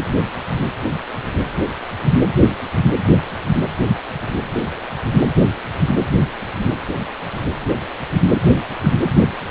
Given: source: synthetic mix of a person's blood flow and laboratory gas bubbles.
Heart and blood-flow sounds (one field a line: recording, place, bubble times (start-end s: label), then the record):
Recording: Doppler ultrasound of blood flow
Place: precordium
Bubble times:
8.83-8.90 s: bubbles
From the record:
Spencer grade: 1 (occasional bubble signal discernible with the cardiac motion signal, with majority of cardiac periods free of bubbles)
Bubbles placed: anywhere in the cardiac cycle